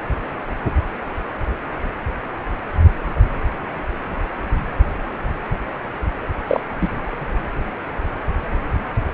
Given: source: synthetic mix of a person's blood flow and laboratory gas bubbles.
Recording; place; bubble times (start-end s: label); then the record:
Doppler ultrasound of blood flow; precordium
6.47-6.60 s: bubbles
6.80-6.88 s: bubbles
From the record:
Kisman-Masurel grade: 113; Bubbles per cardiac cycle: 1 to 2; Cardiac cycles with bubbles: 1 to 10%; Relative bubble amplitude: loud (0.450 to 0.775); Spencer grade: 1 (occasional bubble signal discernible with the cardiac motion signal, with majority of cardiac periods free of bubbles); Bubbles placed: anywhere in the cardiac cycle